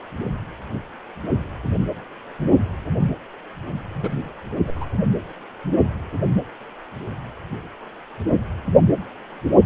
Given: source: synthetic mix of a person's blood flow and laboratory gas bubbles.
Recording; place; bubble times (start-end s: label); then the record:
Doppler ultrasound of blood flow; precordium
3.95-4.17 s: bubbles
4.65-4.73 s: bubbles
4.75-4.85 s: bubbles
From the record:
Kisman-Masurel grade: 211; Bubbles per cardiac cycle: several, 3 to 8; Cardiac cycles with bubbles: 1 to 10%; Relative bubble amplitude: barely perceptible (0.100 to 0.250); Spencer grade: 1 (occasional bubble signal discernible with the cardiac motion signal, with majority of cardiac periods free of bubbles); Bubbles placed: anywhere in the cardiac cycle